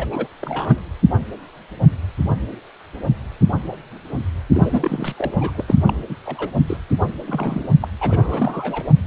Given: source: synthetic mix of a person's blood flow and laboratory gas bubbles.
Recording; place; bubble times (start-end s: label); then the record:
Doppler ultrasound of blood flow; precordium
0.00-0.05 s: bubbles
0.10-0.28 s: bubbles
0.41-0.80 s: bubbles
4.52-5.13 s: bubbles
5.17-5.34 s: bubbles
5.38-5.63 s: bubbles
5.67-5.75 s: bubbles
5.85-5.94 s: bubbles
6.09-6.17 s: bubbles
6.25-6.50 s: bubbles
6.67-6.77 s: bubbles
7.27-7.67 s: bubbles
7.81-7.88 s: bubbles
8.00-8.88 s: bubbles
From the record:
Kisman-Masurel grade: 332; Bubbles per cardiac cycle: rolling drumbeat, 9 or more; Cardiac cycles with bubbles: 50 to 99%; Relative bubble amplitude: moderate (0.250 to 0.450); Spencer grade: 3 (all of the cardiac periods contain showers or single bubble signals, but not dominating or overriding the cardiac motion signals); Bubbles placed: only in the low amplitude regions of the cardiac cycle